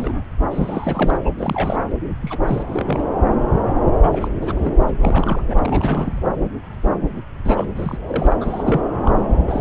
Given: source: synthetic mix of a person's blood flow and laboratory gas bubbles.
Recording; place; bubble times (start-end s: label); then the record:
Doppler ultrasound of blood flow; subclavian vein
0.00-0.24 s: bubbles
0.51-1.17 s: bubbles
1.25-1.31 s: bubbles
1.38-1.78 s: bubbles
2.21-2.38 s: bubbles
2.45-2.63 s: bubbles
2.68-3.04 s: bubbles
4.03-4.28 s: bubbles
4.41-4.92 s: bubbles
5.00-5.43 s: bubbles
5.48-5.59 s: bubbles
5.62-6.20 s: bubbles
7.45-7.65 s: bubbles
7.75-7.97 s: bubbles
8.08-8.38 s: bubbles
8.41-8.81 s: bubbles
9.05-9.27 s: bubbles
9.31-9.38 s: bubbles
9.46-9.61 s: bubbles
From the record:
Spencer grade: 3 (all of the cardiac periods contain showers or single bubble signals, but not dominating or overriding the cardiac motion signals); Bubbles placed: anywhere in the cardiac cycle